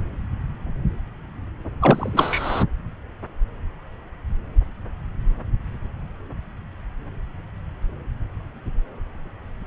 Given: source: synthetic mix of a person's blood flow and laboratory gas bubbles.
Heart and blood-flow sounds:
Doppler ultrasound of blood flow; subclavian vein
1.81-2.64 s: bubbles
From the record:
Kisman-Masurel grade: 213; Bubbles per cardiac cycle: several, 3 to 8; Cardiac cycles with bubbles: 1 to 10%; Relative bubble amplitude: loud (0.450 to 0.775); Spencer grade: 1 (occasional bubble signal discernible with the cardiac motion signal, with majority of cardiac periods free of bubbles); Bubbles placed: anywhere in the cardiac cycle

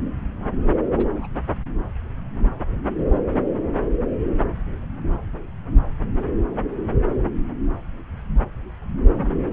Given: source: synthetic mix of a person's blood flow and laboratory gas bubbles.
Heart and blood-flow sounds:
Doppler ultrasound of blood flow; subclavian vein
0.96-1.09 s: bubbles
1.15-1.27 s: bubbles
From the record:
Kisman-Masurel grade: 111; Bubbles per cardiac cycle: 1 to 2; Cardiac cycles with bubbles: 1 to 10%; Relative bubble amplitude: barely perceptible (0.100 to 0.250); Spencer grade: 1 (occasional bubble signal discernible with the cardiac motion signal, with majority of cardiac periods free of bubbles); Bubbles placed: anywhere in the cardiac cycle

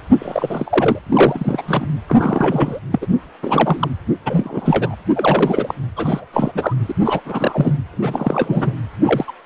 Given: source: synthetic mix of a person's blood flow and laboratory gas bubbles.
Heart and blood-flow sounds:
Doppler ultrasound of blood flow; precordium
0.19-0.99 s: bubbles
1.06-1.62 s: bubbles
1.67-1.86 s: bubbles
2.08-2.79 s: bubbles
2.92-3.06 s: bubbles
3.43-3.91 s: bubbles
4.25-4.95 s: bubbles
5.14-5.74 s: bubbles
5.95-6.24 s: bubbles
6.32-6.52 s: bubbles
6.54-6.75 s: bubbles
6.88-6.92 s: bubbles
7.04-7.20 s: bubbles
7.25-7.77 s: bubbles
7.92-8.75 s: bubbles
9.01-9.32 s: bubbles
From the record:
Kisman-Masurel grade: 343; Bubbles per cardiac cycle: rolling drumbeat, 9 or more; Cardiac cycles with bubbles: 100%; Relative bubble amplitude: loud (0.450 to 0.775); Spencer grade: 3 (all of the cardiac periods contain showers or single bubble signals, but not dominating or overriding the cardiac motion signals); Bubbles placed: anywhere in the cardiac cycle

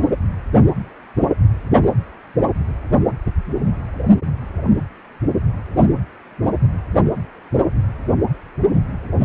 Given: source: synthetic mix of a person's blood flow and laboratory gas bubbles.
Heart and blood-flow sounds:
Doppler ultrasound of blood flow; precordium
no bubbles
From the record:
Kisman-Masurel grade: 000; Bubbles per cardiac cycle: 0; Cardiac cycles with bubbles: 0%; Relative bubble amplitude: no bubbles discernible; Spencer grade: 0 (complete lack of bubble signals)

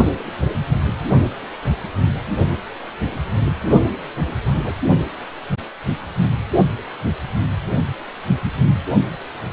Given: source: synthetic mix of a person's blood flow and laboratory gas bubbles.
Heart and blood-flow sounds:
Doppler ultrasound of blood flow; precordium
4.44-4.77 s: bubbles
From the record:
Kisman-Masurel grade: 111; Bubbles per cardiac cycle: 1 to 2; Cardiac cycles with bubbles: 1 to 10%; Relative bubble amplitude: barely perceptible (0.100 to 0.250); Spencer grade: 1 (occasional bubble signal discernible with the cardiac motion signal, with majority of cardiac periods free of bubbles); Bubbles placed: only in the low amplitude regions of the cardiac cycle

